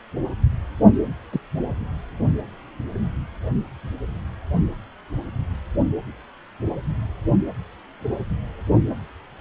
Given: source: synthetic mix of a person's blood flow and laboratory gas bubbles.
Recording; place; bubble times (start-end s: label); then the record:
Doppler ultrasound of blood flow; precordium
1.32-1.40 s: bubbles
From the record:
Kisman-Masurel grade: 112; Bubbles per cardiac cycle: 1 to 2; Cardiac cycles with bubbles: 1 to 10%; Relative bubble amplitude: moderate (0.250 to 0.450); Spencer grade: 1 (occasional bubble signal discernible with the cardiac motion signal, with majority of cardiac periods free of bubbles); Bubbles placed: only in the low amplitude regions of the cardiac cycle